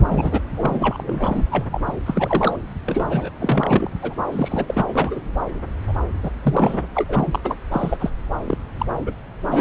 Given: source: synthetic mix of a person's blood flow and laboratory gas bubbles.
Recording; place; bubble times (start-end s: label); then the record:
Doppler ultrasound of blood flow; subclavian vein
0.00-0.41 s: bubbles
0.56-1.44 s: bubbles
1.50-1.66 s: bubbles
1.71-1.81 s: bubbles
1.86-1.96 s: bubbles
2.06-2.56 s: bubbles
2.86-3.30 s: bubbles
3.39-3.91 s: bubbles
4.01-4.14 s: bubbles
4.32-4.84 s: bubbles
4.88-5.21 s: bubbles
5.88-5.93 s: bubbles
6.22-6.30 s: bubbles
6.42-7.04 s: bubbles
7.08-7.39 s: bubbles
7.43-7.58 s: bubbles
7.71-7.97 s: bubbles
8.00-8.10 s: bubbles
8.46-8.58 s: bubbles
8.79-8.86 s: bubbles
9.00-9.14 s: bubbles
9.46-9.61 s: bubbles
From the record:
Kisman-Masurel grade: 343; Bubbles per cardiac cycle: rolling drumbeat, 9 or more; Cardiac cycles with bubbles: 100%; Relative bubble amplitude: loud (0.450 to 0.775); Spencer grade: 3 (all of the cardiac periods contain showers or single bubble signals, but not dominating or overriding the cardiac motion signals); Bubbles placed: anywhere in the cardiac cycle